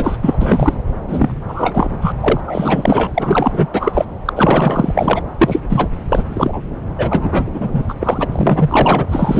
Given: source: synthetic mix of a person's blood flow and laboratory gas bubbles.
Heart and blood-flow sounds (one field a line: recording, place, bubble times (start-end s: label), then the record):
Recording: Doppler ultrasound of blood flow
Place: subclavian vein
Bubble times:
0.00-0.16 s: bubbles
0.21-0.78 s: bubbles
1.08-1.42 s: bubbles
1.48-2.12 s: bubbles
2.20-2.41 s: bubbles
2.47-3.67 s: bubbles
3.73-4.05 s: bubbles
4.25-4.33 s: bubbles
4.35-5.22 s: bubbles
5.38-5.60 s: bubbles
5.68-5.89 s: bubbles
6.08-6.23 s: bubbles
6.29-6.62 s: bubbles
6.97-7.82 s: bubbles
7.88-7.95 s: bubbles
8.00-8.29 s: bubbles
8.32-9.06 s: bubbles
9.08-9.40 s: bubbles
From the record:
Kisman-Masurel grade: 444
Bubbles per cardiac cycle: continuous sound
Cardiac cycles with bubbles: 100%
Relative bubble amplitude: maximal (0.775 to 0.999)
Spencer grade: 4 (maximum detectable bubble signal sounding continuously throughout systole and diastole of every cardiac period, and overriding the amplitude of the normal cardiac signals)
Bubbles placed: anywhere in the cardiac cycle